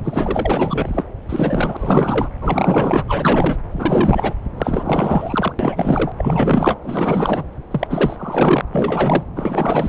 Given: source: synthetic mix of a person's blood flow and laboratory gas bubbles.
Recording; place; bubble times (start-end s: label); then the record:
Doppler ultrasound of blood flow; subclavian vein
0.03-1.02 s: bubbles
1.29-2.29 s: bubbles
2.41-3.04 s: bubbles
3.08-3.58 s: bubbles
3.71-4.33 s: bubbles
4.57-5.53 s: bubbles
5.59-6.12 s: bubbles
6.17-6.79 s: bubbles
6.82-7.44 s: bubbles
7.71-7.87 s: bubbles
7.90-8.61 s: bubbles
8.72-9.23 s: bubbles
9.36-9.89 s: bubbles
From the record:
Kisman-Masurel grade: 444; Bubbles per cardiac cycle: continuous sound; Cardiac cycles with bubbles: 100%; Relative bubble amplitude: maximal (0.775 to 0.999); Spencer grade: 4 (maximum detectable bubble signal sounding continuously throughout systole and diastole of every cardiac period, and overriding the amplitude of the normal cardiac signals); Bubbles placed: anywhere in the cardiac cycle